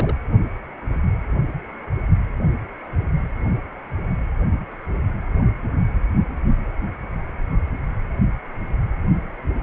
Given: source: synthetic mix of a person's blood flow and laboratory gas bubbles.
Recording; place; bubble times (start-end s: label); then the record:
Doppler ultrasound of blood flow; precordium
0.00-0.15 s: bubbles
From the record:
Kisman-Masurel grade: 221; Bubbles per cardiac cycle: several, 3 to 8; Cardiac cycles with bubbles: 10 to 50%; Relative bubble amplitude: barely perceptible (0.100 to 0.250); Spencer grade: 2 (many but less than half of the cardiac periods contain bubble signals, singularly or in groups); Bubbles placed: only in the low amplitude regions of the cardiac cycle